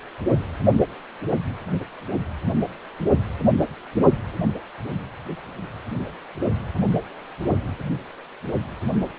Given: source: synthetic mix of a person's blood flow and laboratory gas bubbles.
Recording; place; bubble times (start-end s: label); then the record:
Doppler ultrasound of blood flow; precordium
no bubbles
From the record:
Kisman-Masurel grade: 000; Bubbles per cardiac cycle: 0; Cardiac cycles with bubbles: 0%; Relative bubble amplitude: no bubbles discernible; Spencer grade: 0 (complete lack of bubble signals)